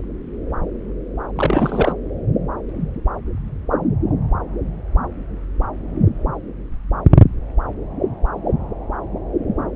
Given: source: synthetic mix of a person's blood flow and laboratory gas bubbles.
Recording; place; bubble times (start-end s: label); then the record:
Doppler ultrasound of blood flow; subclavian vein
1.35-1.93 s: bubbles
From the record:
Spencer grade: 1 (occasional bubble signal discernible with the cardiac motion signal, with majority of cardiac periods free of bubbles); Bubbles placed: anywhere in the cardiac cycle